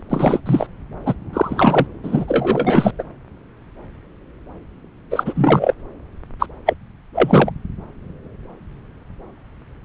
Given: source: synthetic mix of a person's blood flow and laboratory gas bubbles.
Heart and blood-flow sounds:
Doppler ultrasound of blood flow; subclavian vein
0.10-0.40 s: bubbles
0.45-0.67 s: bubbles
1.05-1.14 s: bubbles
1.33-1.87 s: bubbles
2.03-2.25 s: bubbles
2.27-2.93 s: bubbles
2.99-3.03 s: bubbles
5.10-5.74 s: bubbles
6.39-6.46 s: bubbles
6.65-6.74 s: bubbles
7.14-7.51 s: bubbles
From the record:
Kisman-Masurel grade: 223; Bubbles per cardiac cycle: several, 3 to 8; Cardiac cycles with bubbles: 10 to 50%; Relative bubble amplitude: loud (0.450 to 0.775); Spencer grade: 2 (many but less than half of the cardiac periods contain bubble signals, singularly or in groups); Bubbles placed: anywhere in the cardiac cycle

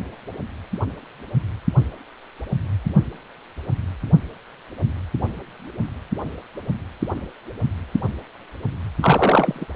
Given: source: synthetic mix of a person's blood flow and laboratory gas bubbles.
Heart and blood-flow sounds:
Doppler ultrasound of blood flow; precordium
9.00-9.67 s: bubbles
From the record:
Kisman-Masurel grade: 223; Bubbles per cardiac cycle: several, 3 to 8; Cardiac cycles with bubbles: 10 to 50%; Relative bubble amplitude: loud (0.450 to 0.775); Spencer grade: 2 (many but less than half of the cardiac periods contain bubble signals, singularly or in groups); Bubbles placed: anywhere in the cardiac cycle

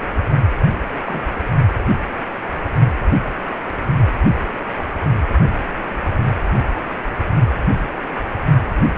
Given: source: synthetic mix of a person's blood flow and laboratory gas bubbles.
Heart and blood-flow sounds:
Doppler ultrasound of blood flow; precordium
1.03-1.23 s: bubbles
1.81-1.96 s: bubbles
From the record:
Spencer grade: 2 (many but less than half of the cardiac periods contain bubble signals, singularly or in groups); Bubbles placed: only in the low amplitude regions of the cardiac cycle

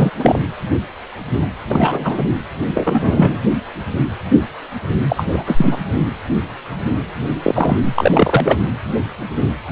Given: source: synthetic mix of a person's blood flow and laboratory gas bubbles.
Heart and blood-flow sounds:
Doppler ultrasound of blood flow; precordium
0.00-0.10 s: bubbles
0.18-0.39 s: bubbles
1.69-2.25 s: bubbles
2.75-3.38 s: bubbles
5.09-5.25 s: bubbles
5.32-5.76 s: bubbles
7.42-7.80 s: bubbles
7.95-8.57 s: bubbles
From the record:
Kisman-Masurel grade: 233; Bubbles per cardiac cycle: several, 3 to 8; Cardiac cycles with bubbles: 50 to 99%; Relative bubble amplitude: loud (0.450 to 0.775); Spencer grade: 3 (all of the cardiac periods contain showers or single bubble signals, but not dominating or overriding the cardiac motion signals); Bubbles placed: anywhere in the cardiac cycle

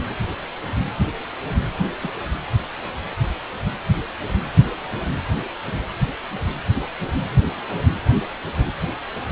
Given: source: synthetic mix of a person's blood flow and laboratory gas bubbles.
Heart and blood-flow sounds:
Doppler ultrasound of blood flow; precordium
1.78-1.88 s: bubbles
2.03-2.09 s: bubbles
From the record:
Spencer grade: 1 (occasional bubble signal discernible with the cardiac motion signal, with majority of cardiac periods free of bubbles); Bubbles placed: anywhere in the cardiac cycle

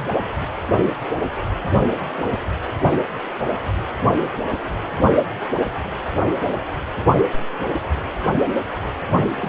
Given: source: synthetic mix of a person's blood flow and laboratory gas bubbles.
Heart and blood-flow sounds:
Doppler ultrasound of blood flow; precordium
9.26-9.49 s: bubbles
From the record:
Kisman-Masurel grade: 111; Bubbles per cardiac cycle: 1 to 2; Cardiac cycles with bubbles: 1 to 10%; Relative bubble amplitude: barely perceptible (0.100 to 0.250); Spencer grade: 1 (occasional bubble signal discernible with the cardiac motion signal, with majority of cardiac periods free of bubbles); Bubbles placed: anywhere in the cardiac cycle

